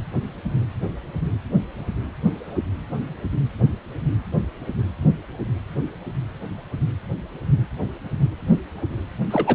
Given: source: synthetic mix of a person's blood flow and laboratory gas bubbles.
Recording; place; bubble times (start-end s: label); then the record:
Doppler ultrasound of blood flow; precordium
9.30-9.55 s: bubbles
From the record:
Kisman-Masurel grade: 212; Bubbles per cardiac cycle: several, 3 to 8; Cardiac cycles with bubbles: 1 to 10%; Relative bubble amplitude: moderate (0.250 to 0.450); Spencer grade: 1 (occasional bubble signal discernible with the cardiac motion signal, with majority of cardiac periods free of bubbles); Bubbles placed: anywhere in the cardiac cycle